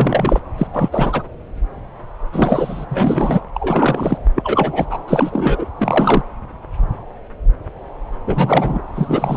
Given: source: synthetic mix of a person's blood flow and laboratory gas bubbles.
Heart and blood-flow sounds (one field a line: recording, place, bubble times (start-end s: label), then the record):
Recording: Doppler ultrasound of blood flow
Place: subclavian vein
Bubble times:
0.00-0.39 s: bubbles
0.57-0.67 s: bubbles
0.73-0.89 s: bubbles
0.92-1.23 s: bubbles
2.32-2.85 s: bubbles
2.90-3.41 s: bubbles
3.54-4.18 s: bubbles
4.35-4.85 s: bubbles
4.90-4.98 s: bubbles
5.08-5.66 s: bubbles
5.76-6.22 s: bubbles
8.27-8.81 s: bubbles
8.95-9.37 s: bubbles
From the record:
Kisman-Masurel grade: 333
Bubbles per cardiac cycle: rolling drumbeat, 9 or more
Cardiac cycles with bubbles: 50 to 99%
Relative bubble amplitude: loud (0.450 to 0.775)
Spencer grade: 3 (all of the cardiac periods contain showers or single bubble signals, but not dominating or overriding the cardiac motion signals)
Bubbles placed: anywhere in the cardiac cycle